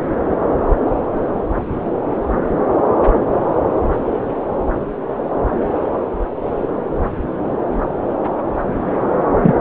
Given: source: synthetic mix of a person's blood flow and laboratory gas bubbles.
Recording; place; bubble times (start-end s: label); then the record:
Doppler ultrasound of blood flow; subclavian vein
9.42-9.55 s: bubbles
From the record:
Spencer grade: 1 (occasional bubble signal discernible with the cardiac motion signal, with majority of cardiac periods free of bubbles); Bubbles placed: anywhere in the cardiac cycle